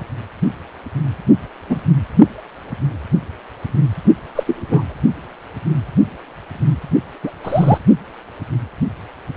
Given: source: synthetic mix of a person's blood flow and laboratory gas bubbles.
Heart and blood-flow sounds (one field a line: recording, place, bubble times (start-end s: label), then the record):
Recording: Doppler ultrasound of blood flow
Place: precordium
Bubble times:
1.68-1.81 s: bubbles
4.35-4.43 s: bubbles
4.46-4.94 s: bubbles
7.23-7.31 s: bubbles
7.44-7.78 s: bubbles
From the record:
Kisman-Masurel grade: 123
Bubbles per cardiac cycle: 1 to 2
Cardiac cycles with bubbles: 10 to 50%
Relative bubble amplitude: loud (0.450 to 0.775)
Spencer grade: 2 (many but less than half of the cardiac periods contain bubble signals, singularly or in groups)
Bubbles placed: only in the low amplitude regions of the cardiac cycle